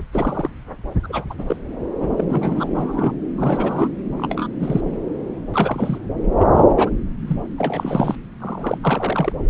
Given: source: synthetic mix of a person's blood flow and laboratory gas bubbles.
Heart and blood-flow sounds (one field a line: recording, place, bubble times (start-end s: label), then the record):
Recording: Doppler ultrasound of blood flow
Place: subclavian vein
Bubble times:
0.00-0.04 s: bubbles
0.12-0.50 s: bubbles
1.03-1.33 s: bubbles
1.38-1.56 s: bubbles
2.00-2.10 s: bubbles
2.17-2.24 s: bubbles
2.29-3.14 s: bubbles
3.38-3.91 s: bubbles
4.17-4.47 s: bubbles
4.60-4.81 s: bubbles
5.52-5.98 s: bubbles
6.38-6.47 s: bubbles
6.55-6.65 s: bubbles
6.77-6.90 s: bubbles
7.27-7.36 s: bubbles
7.58-8.15 s: bubbles
8.40-8.78 s: bubbles
8.82-9.32 s: bubbles
From the record:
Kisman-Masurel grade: 242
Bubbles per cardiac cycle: several, 3 to 8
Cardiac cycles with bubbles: 100%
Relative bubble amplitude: moderate (0.250 to 0.450)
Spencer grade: 3 (all of the cardiac periods contain showers or single bubble signals, but not dominating or overriding the cardiac motion signals)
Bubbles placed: anywhere in the cardiac cycle